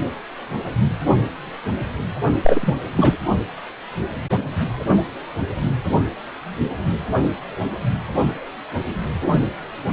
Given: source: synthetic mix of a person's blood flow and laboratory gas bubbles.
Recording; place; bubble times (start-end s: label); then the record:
Doppler ultrasound of blood flow; precordium
2.44-2.73 s: bubbles
2.96-3.16 s: bubbles
From the record:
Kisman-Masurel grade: 213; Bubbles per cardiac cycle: several, 3 to 8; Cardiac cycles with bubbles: 1 to 10%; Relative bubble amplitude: loud (0.450 to 0.775); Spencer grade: 1 (occasional bubble signal discernible with the cardiac motion signal, with majority of cardiac periods free of bubbles); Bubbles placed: only in the low amplitude regions of the cardiac cycle